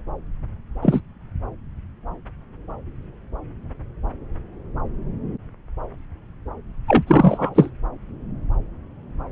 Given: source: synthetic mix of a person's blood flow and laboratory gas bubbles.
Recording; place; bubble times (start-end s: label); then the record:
Doppler ultrasound of blood flow; subclavian vein
0.82-1.01 s: bubbles
6.87-7.03 s: bubbles
7.06-7.71 s: bubbles
From the record:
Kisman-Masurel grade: 223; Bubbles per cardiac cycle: several, 3 to 8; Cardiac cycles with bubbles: 10 to 50%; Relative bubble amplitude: loud (0.450 to 0.775); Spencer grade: 2 (many but less than half of the cardiac periods contain bubble signals, singularly or in groups); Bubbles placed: anywhere in the cardiac cycle